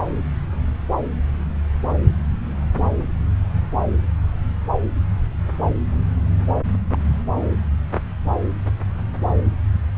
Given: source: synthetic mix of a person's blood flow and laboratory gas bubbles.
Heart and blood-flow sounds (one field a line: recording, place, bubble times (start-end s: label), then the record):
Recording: Doppler ultrasound of blood flow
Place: subclavian vein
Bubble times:
6.92-6.97 s: bubbles
From the record:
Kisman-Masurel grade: 111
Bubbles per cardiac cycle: 1 to 2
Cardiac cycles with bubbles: 1 to 10%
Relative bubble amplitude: barely perceptible (0.100 to 0.250)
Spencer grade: 1 (occasional bubble signal discernible with the cardiac motion signal, with majority of cardiac periods free of bubbles)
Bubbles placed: anywhere in the cardiac cycle